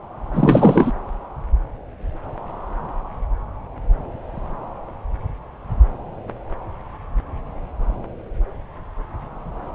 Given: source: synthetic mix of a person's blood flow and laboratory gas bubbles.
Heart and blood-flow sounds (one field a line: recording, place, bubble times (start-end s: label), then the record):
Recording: Doppler ultrasound of blood flow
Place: subclavian vein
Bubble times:
0.33-0.92 s: bubbles
From the record:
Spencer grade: 1 (occasional bubble signal discernible with the cardiac motion signal, with majority of cardiac periods free of bubbles)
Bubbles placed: anywhere in the cardiac cycle